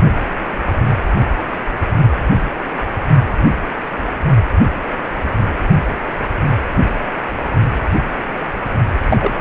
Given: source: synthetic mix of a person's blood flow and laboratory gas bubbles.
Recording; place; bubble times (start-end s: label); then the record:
Doppler ultrasound of blood flow; precordium
9.09-9.18 s: bubbles
9.20-9.31 s: bubbles
From the record:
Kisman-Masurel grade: 213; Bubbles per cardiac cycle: several, 3 to 8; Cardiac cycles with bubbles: 1 to 10%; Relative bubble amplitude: loud (0.450 to 0.775); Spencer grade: 1 (occasional bubble signal discernible with the cardiac motion signal, with majority of cardiac periods free of bubbles); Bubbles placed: only in the low amplitude regions of the cardiac cycle